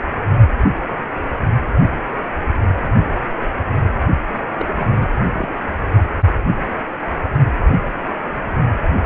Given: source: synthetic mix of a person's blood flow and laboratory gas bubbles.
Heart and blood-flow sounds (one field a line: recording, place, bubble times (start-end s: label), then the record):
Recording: Doppler ultrasound of blood flow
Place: precordium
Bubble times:
4.59-4.65 s: bubbles
4.76-5.09 s: bubbles
5.32-5.49 s: bubbles
From the record:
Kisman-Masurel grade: 222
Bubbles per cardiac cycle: several, 3 to 8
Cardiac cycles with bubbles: 10 to 50%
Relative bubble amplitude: moderate (0.250 to 0.450)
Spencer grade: 2 (many but less than half of the cardiac periods contain bubble signals, singularly or in groups)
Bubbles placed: only in the low amplitude regions of the cardiac cycle